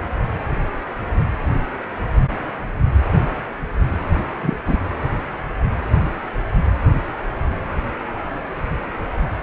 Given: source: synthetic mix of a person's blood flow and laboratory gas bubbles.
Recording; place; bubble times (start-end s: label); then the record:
Doppler ultrasound of blood flow; precordium
4.42-4.57 s: bubbles
4.66-4.79 s: bubbles
From the record:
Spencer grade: 1 (occasional bubble signal discernible with the cardiac motion signal, with majority of cardiac periods free of bubbles); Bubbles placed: anywhere in the cardiac cycle